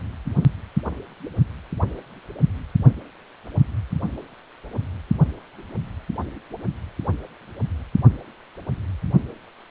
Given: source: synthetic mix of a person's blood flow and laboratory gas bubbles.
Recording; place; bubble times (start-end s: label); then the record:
Doppler ultrasound of blood flow; precordium
no bubbles
From the record:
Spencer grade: 0 (complete lack of bubble signals)